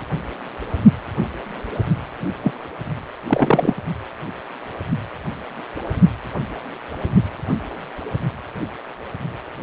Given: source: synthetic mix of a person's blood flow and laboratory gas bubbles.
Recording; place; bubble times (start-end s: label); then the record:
Doppler ultrasound of blood flow; precordium
2.43-2.53 s: bubbles
3.27-3.74 s: bubbles
From the record:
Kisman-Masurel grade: 213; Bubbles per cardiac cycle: several, 3 to 8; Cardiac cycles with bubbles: 1 to 10%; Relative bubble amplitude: loud (0.450 to 0.775); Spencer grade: 1 (occasional bubble signal discernible with the cardiac motion signal, with majority of cardiac periods free of bubbles); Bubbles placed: only in the low amplitude regions of the cardiac cycle